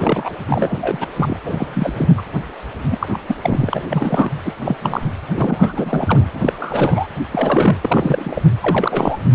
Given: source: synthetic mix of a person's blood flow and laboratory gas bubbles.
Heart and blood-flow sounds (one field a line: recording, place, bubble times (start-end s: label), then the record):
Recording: Doppler ultrasound of blood flow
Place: precordium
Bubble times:
0.00-0.30 s: bubbles
0.48-1.08 s: bubbles
1.16-1.40 s: bubbles
1.44-2.13 s: bubbles
2.17-2.21 s: bubbles
2.90-3.08 s: bubbles
3.12-3.17 s: bubbles
3.27-3.35 s: bubbles
3.42-3.88 s: bubbles
3.91-4.32 s: bubbles
4.45-4.54 s: bubbles
4.59-4.76 s: bubbles
4.80-5.09 s: bubbles
5.33-6.29 s: bubbles
6.34-7.06 s: bubbles
7.31-7.78 s: bubbles
7.82-8.43 s: bubbles
8.61-9.19 s: bubbles
From the record:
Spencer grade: 3 (all of the cardiac periods contain showers or single bubble signals, but not dominating or overriding the cardiac motion signals)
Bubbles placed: anywhere in the cardiac cycle